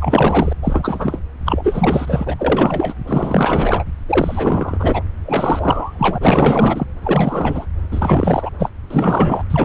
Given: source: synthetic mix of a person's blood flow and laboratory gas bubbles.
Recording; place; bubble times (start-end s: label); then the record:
Doppler ultrasound of blood flow; subclavian vein
0.00-0.53 s: bubbles
0.62-1.20 s: bubbles
1.45-2.35 s: bubbles
2.38-2.93 s: bubbles
3.06-3.85 s: bubbles
4.08-5.03 s: bubbles
5.25-6.86 s: bubbles
7.04-7.66 s: bubbles
7.91-8.50 s: bubbles
8.59-8.70 s: bubbles
8.90-9.44 s: bubbles
9.50-9.65 s: bubbles
From the record:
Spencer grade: 4 (maximum detectable bubble signal sounding continuously throughout systole and diastole of every cardiac period, and overriding the amplitude of the normal cardiac signals); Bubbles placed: anywhere in the cardiac cycle